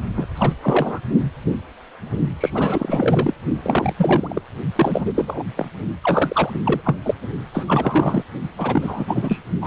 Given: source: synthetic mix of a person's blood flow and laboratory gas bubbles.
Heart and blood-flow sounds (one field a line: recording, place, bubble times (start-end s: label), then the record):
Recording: Doppler ultrasound of blood flow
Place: precordium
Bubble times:
0.16-0.26 s: bubbles
0.35-0.53 s: bubbles
0.61-1.00 s: bubbles
2.40-2.50 s: bubbles
2.54-3.34 s: bubbles
3.63-3.93 s: bubbles
3.98-4.42 s: bubbles
4.75-5.42 s: bubbles
5.56-5.67 s: bubbles
6.01-6.59 s: bubbles
6.63-6.81 s: bubbles
6.85-6.96 s: bubbles
7.02-7.14 s: bubbles
7.54-8.23 s: bubbles
8.57-9.39 s: bubbles
9.61-9.67 s: bubbles
From the record:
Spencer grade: 3 (all of the cardiac periods contain showers or single bubble signals, but not dominating or overriding the cardiac motion signals)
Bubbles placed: only in the low amplitude regions of the cardiac cycle